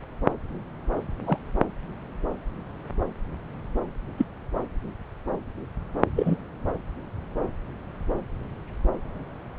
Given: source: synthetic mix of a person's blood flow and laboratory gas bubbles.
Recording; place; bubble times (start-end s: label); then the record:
Doppler ultrasound of blood flow; subclavian vein
1.26-1.38 s: bubbles
4.17-4.25 s: bubbles
6.15-6.36 s: bubbles
From the record:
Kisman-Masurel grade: 122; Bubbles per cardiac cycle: 1 to 2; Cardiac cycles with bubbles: 10 to 50%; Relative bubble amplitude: moderate (0.250 to 0.450); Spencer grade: 2 (many but less than half of the cardiac periods contain bubble signals, singularly or in groups); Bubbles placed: anywhere in the cardiac cycle